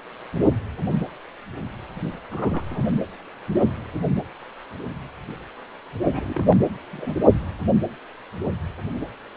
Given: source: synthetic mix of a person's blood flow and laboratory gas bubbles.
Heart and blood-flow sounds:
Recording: Doppler ultrasound of blood flow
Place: precordium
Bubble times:
2.30-2.64 s: bubbles
2.69-2.92 s: bubbles
6.12-6.58 s: bubbles
6.93-7.15 s: bubbles
From the record:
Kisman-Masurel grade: 221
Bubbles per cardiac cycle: several, 3 to 8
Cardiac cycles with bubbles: 10 to 50%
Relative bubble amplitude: barely perceptible (0.100 to 0.250)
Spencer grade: 2 (many but less than half of the cardiac periods contain bubble signals, singularly or in groups)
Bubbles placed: only in the low amplitude regions of the cardiac cycle

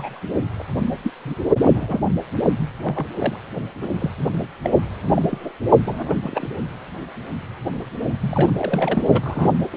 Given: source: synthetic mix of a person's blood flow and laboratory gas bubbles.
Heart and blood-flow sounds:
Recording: Doppler ultrasound of blood flow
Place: precordium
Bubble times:
0.00-0.20 s: bubbles
0.58-0.62 s: bubbles
1.03-1.11 s: bubbles
1.25-1.34 s: bubbles
1.57-2.06 s: bubbles
2.82-3.06 s: bubbles
3.19-3.36 s: bubbles
3.54-3.61 s: bubbles
3.81-4.10 s: bubbles
4.63-4.70 s: bubbles
5.16-5.22 s: bubbles
5.31-5.53 s: bubbles
5.85-6.14 s: bubbles
6.22-6.46 s: bubbles
8.21-8.52 s: bubbles
8.58-9.03 s: bubbles
9.12-9.20 s: bubbles
9.23-9.53 s: bubbles
9.72-9.76 s: bubbles
From the record:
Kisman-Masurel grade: 232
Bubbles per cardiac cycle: several, 3 to 8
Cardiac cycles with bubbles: 50 to 99%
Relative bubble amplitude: moderate (0.250 to 0.450)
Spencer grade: 3 (all of the cardiac periods contain showers or single bubble signals, but not dominating or overriding the cardiac motion signals)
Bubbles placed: only in the low amplitude regions of the cardiac cycle

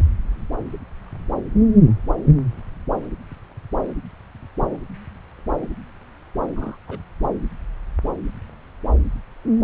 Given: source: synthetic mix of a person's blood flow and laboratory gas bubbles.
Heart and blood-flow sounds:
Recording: Doppler ultrasound of blood flow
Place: subclavian vein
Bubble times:
6.56-6.77 s: bubbles
6.88-7.00 s: bubbles
From the record:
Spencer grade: 1 (occasional bubble signal discernible with the cardiac motion signal, with majority of cardiac periods free of bubbles)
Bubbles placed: anywhere in the cardiac cycle

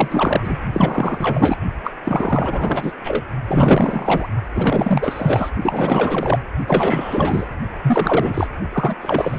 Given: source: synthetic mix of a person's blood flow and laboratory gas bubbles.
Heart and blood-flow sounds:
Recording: Doppler ultrasound of blood flow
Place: precordium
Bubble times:
0.00-0.57 s: bubbles
0.73-1.56 s: bubbles
1.84-1.92 s: bubbles
2.04-2.93 s: bubbles
3.03-3.24 s: bubbles
3.47-4.29 s: bubbles
4.54-5.50 s: bubbles
5.62-6.39 s: bubbles
6.67-7.46 s: bubbles
7.83-8.47 s: bubbles
8.72-8.95 s: bubbles
9.01-9.39 s: bubbles
From the record:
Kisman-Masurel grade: 444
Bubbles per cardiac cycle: continuous sound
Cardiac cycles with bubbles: 100%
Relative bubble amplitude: maximal (0.775 to 0.999)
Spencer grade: 4 (maximum detectable bubble signal sounding continuously throughout systole and diastole of every cardiac period, and overriding the amplitude of the normal cardiac signals)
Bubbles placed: only in the low amplitude regions of the cardiac cycle

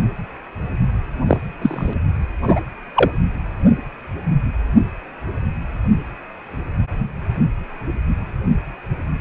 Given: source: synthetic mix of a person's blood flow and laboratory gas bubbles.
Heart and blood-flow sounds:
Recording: Doppler ultrasound of blood flow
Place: precordium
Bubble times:
1.28-1.38 s: bubbles
1.61-1.93 s: bubbles
2.42-2.60 s: bubbles
2.96-3.11 s: bubbles
From the record:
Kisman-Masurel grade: 123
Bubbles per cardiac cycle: 1 to 2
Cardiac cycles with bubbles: 10 to 50%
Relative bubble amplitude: loud (0.450 to 0.775)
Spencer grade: 2 (many but less than half of the cardiac periods contain bubble signals, singularly or in groups)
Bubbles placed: only in the low amplitude regions of the cardiac cycle

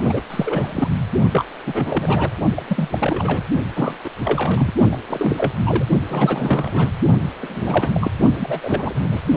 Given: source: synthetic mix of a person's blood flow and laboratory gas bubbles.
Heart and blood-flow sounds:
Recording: Doppler ultrasound of blood flow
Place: precordium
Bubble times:
0.00-0.21 s: bubbles
0.30-0.90 s: bubbles
1.33-1.45 s: bubbles
1.67-2.30 s: bubbles
2.55-2.63 s: bubbles
2.67-3.42 s: bubbles
3.75-3.97 s: bubbles
4.04-4.09 s: bubbles
4.24-4.73 s: bubbles
4.91-4.96 s: bubbles
5.08-5.52 s: bubbles
5.65-5.85 s: bubbles
6.08-6.89 s: bubbles
7.39-8.12 s: bubbles
8.37-9.21 s: bubbles
From the record:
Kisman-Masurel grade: 342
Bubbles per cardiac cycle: rolling drumbeat, 9 or more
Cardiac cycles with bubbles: 100%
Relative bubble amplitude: moderate (0.250 to 0.450)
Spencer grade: 3 (all of the cardiac periods contain showers or single bubble signals, but not dominating or overriding the cardiac motion signals)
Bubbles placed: only in the low amplitude regions of the cardiac cycle

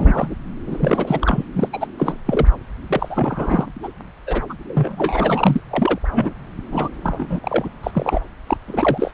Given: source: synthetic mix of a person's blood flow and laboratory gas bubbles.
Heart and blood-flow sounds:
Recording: Doppler ultrasound of blood flow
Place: subclavian vein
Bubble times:
0.00-0.35 s: bubbles
0.67-1.45 s: bubbles
1.54-1.69 s: bubbles
1.73-1.88 s: bubbles
1.98-2.18 s: bubbles
2.27-2.47 s: bubbles
2.87-3.66 s: bubbles
3.83-3.88 s: bubbles
4.26-4.42 s: bubbles
4.49-4.54 s: bubbles
4.74-5.61 s: bubbles
5.70-5.99 s: bubbles
6.12-6.34 s: bubbles
6.71-6.88 s: bubbles
7.03-7.69 s: bubbles
7.83-8.21 s: bubbles
8.47-8.57 s: bubbles
8.67-9.11 s: bubbles
From the record:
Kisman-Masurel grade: 342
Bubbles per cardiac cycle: rolling drumbeat, 9 or more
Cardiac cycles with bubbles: 100%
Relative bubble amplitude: moderate (0.250 to 0.450)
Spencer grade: 3 (all of the cardiac periods contain showers or single bubble signals, but not dominating or overriding the cardiac motion signals)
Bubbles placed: anywhere in the cardiac cycle

